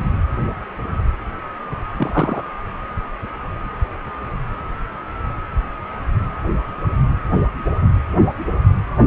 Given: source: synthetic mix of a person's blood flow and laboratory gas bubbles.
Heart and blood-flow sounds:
Doppler ultrasound of blood flow; precordium
1.98-2.42 s: bubbles
From the record:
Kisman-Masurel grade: 113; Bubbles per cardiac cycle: 1 to 2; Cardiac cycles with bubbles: 1 to 10%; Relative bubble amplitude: loud (0.450 to 0.775); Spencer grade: 1 (occasional bubble signal discernible with the cardiac motion signal, with majority of cardiac periods free of bubbles); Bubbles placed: anywhere in the cardiac cycle

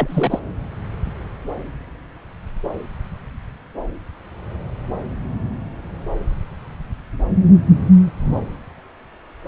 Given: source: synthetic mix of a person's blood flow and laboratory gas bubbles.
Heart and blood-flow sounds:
Doppler ultrasound of blood flow; subclavian vein
0.00-0.40 s: bubbles
From the record:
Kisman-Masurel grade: 212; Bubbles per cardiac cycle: several, 3 to 8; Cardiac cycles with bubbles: 1 to 10%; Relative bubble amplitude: moderate (0.250 to 0.450); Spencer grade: 1 (occasional bubble signal discernible with the cardiac motion signal, with majority of cardiac periods free of bubbles); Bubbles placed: anywhere in the cardiac cycle

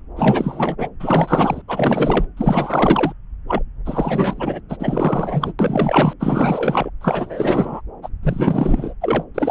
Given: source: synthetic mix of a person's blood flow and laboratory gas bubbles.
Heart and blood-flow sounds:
Doppler ultrasound of blood flow; subclavian vein
0.16-0.89 s: bubbles
0.99-1.62 s: bubbles
1.68-2.27 s: bubbles
2.37-3.12 s: bubbles
3.47-3.62 s: bubbles
3.85-4.60 s: bubbles
4.69-4.77 s: bubbles
4.79-5.52 s: bubbles
5.59-6.13 s: bubbles
6.19-6.90 s: bubbles
7.01-7.81 s: bubbles
8.02-8.09 s: bubbles
8.23-8.94 s: bubbles
9.01-9.24 s: bubbles
9.35-9.51 s: bubbles
From the record:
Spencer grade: 4 (maximum detectable bubble signal sounding continuously throughout systole and diastole of every cardiac period, and overriding the amplitude of the normal cardiac signals); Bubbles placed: anywhere in the cardiac cycle

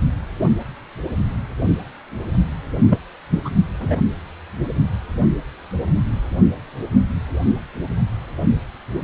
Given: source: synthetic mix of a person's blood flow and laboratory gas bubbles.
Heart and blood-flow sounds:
Doppler ultrasound of blood flow; precordium
2.89-2.98 s: bubbles
3.30-3.40 s: bubbles
3.45-3.50 s: bubbles
3.80-3.97 s: bubbles
From the record:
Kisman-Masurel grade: 213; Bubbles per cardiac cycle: several, 3 to 8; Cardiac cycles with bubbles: 1 to 10%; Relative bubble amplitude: loud (0.450 to 0.775); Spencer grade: 1 (occasional bubble signal discernible with the cardiac motion signal, with majority of cardiac periods free of bubbles); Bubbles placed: only in the low amplitude regions of the cardiac cycle

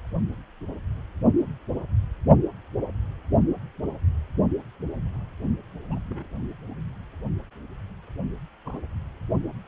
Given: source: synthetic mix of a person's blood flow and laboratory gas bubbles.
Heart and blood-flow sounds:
Doppler ultrasound of blood flow; precordium
5.88-5.99 s: bubbles
6.08-6.25 s: bubbles
8.65-8.80 s: bubbles
From the record:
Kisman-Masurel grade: 121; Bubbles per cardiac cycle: 1 to 2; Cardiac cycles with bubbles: 10 to 50%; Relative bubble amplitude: barely perceptible (0.100 to 0.250); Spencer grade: 2 (many but less than half of the cardiac periods contain bubble signals, singularly or in groups); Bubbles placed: only in the low amplitude regions of the cardiac cycle

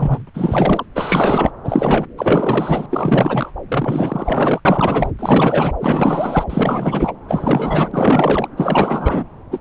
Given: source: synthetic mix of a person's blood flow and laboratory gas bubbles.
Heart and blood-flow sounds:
Doppler ultrasound of blood flow; subclavian vein
0.00-0.30 s: bubbles
0.34-0.85 s: bubbles
0.94-1.50 s: bubbles
1.64-2.06 s: bubbles
2.17-2.86 s: bubbles
2.90-3.51 s: bubbles
3.68-4.60 s: bubbles
4.65-5.12 s: bubbles
5.18-5.72 s: bubbles
5.80-6.44 s: bubbles
6.50-7.12 s: bubbles
7.28-8.47 s: bubbles
8.56-9.24 s: bubbles
9.51-9.59 s: bubbles
From the record:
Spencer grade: 4 (maximum detectable bubble signal sounding continuously throughout systole and diastole of every cardiac period, and overriding the amplitude of the normal cardiac signals); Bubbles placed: anywhere in the cardiac cycle

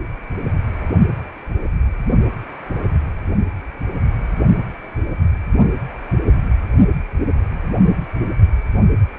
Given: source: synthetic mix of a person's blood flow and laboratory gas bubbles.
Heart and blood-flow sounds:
Doppler ultrasound of blood flow; precordium
no bubbles
From the record:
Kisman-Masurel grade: 000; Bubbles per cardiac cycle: 0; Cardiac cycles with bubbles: 0%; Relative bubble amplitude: no bubbles discernible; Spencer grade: 0 (complete lack of bubble signals)

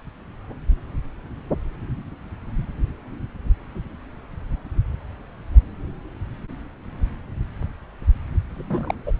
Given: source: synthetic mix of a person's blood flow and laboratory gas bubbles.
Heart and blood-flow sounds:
Doppler ultrasound of blood flow; subclavian vein
8.55-8.95 s: bubbles
9.06-9.12 s: bubbles
From the record:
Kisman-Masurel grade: 211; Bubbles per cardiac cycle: several, 3 to 8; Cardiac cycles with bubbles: 1 to 10%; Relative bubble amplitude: barely perceptible (0.100 to 0.250); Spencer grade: 1 (occasional bubble signal discernible with the cardiac motion signal, with majority of cardiac periods free of bubbles); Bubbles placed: anywhere in the cardiac cycle

